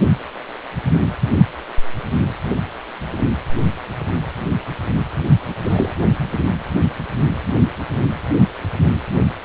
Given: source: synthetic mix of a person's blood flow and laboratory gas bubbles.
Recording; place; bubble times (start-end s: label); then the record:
Doppler ultrasound of blood flow; precordium
5.63-5.94 s: bubbles
From the record:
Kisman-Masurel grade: 113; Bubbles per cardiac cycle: 1 to 2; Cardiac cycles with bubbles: 1 to 10%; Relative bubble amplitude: loud (0.450 to 0.775); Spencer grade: 1 (occasional bubble signal discernible with the cardiac motion signal, with majority of cardiac periods free of bubbles); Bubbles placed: anywhere in the cardiac cycle